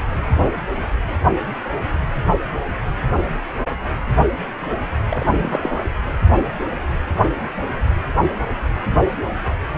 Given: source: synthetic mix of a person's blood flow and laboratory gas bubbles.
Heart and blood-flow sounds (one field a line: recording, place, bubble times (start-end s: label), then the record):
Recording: Doppler ultrasound of blood flow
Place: precordium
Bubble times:
5.09-5.26 s: bubbles
5.34-5.81 s: bubbles
From the record:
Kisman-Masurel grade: 211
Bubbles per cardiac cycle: several, 3 to 8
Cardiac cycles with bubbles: 1 to 10%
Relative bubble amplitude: barely perceptible (0.100 to 0.250)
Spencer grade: 1 (occasional bubble signal discernible with the cardiac motion signal, with majority of cardiac periods free of bubbles)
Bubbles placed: anywhere in the cardiac cycle